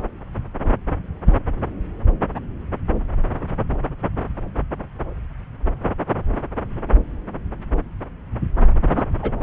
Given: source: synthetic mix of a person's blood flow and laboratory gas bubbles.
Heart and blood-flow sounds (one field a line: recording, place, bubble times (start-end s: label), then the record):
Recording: Doppler ultrasound of blood flow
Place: subclavian vein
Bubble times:
1.25-1.34 s: bubbles
8.94-9.03 s: bubbles
9.21-9.33 s: bubbles
From the record:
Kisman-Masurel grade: 122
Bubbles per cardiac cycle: 1 to 2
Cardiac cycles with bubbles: 10 to 50%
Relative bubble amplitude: moderate (0.250 to 0.450)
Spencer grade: 2 (many but less than half of the cardiac periods contain bubble signals, singularly or in groups)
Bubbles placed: anywhere in the cardiac cycle